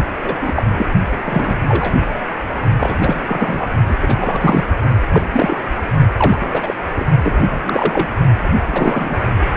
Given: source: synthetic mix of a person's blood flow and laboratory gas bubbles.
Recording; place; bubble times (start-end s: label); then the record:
Doppler ultrasound of blood flow; precordium
0.24-0.66 s: bubbles
0.76-0.86 s: bubbles
1.25-1.58 s: bubbles
1.69-1.93 s: bubbles
2.80-3.21 s: bubbles
3.26-3.70 s: bubbles
3.88-3.95 s: bubbles
4.01-4.64 s: bubbles
5.12-5.22 s: bubbles
5.33-5.58 s: bubbles
5.76-5.81 s: bubbles
6.17-6.38 s: bubbles
6.40-6.76 s: bubbles
6.96-7.05 s: bubbles
7.22-8.08 s: bubbles
8.64-9.16 s: bubbles
From the record:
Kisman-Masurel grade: 243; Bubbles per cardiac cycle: several, 3 to 8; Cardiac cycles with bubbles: 100%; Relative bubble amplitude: loud (0.450 to 0.775); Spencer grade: 3 (all of the cardiac periods contain showers or single bubble signals, but not dominating or overriding the cardiac motion signals); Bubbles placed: only in the low amplitude regions of the cardiac cycle